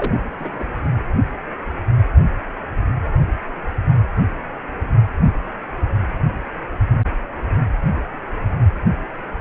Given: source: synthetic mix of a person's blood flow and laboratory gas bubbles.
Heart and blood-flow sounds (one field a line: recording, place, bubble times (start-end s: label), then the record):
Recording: Doppler ultrasound of blood flow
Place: precordium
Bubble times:
0.00-0.20 s: bubbles
0.38-0.76 s: bubbles
From the record:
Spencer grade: 1 (occasional bubble signal discernible with the cardiac motion signal, with majority of cardiac periods free of bubbles)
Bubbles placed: anywhere in the cardiac cycle